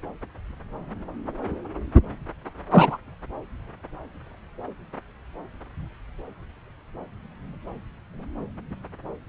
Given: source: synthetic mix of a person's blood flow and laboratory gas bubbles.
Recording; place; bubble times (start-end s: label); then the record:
Doppler ultrasound of blood flow; subclavian vein
2.71-2.98 s: bubbles
From the record:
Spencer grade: 2 (many but less than half of the cardiac periods contain bubble signals, singularly or in groups); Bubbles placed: anywhere in the cardiac cycle